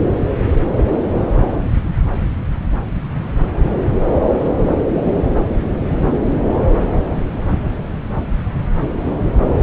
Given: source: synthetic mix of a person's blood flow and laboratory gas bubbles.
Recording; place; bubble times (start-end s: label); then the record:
Doppler ultrasound of blood flow; subclavian vein
no bubbles
From the record:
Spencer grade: 0 (complete lack of bubble signals)